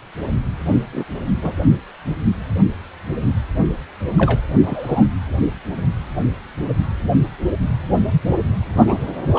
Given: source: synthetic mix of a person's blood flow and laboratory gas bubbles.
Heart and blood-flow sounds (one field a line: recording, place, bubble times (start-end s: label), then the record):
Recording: Doppler ultrasound of blood flow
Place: precordium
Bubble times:
0.92-1.04 s: bubbles
1.42-1.57 s: bubbles
4.18-4.41 s: bubbles
4.63-5.07 s: bubbles
7.02-7.10 s: bubbles
8.87-8.96 s: bubbles
9.33-9.39 s: bubbles
From the record:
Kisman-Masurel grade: 122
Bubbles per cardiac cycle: 1 to 2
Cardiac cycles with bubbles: 10 to 50%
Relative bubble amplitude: moderate (0.250 to 0.450)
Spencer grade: 2 (many but less than half of the cardiac periods contain bubble signals, singularly or in groups)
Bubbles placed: only in the low amplitude regions of the cardiac cycle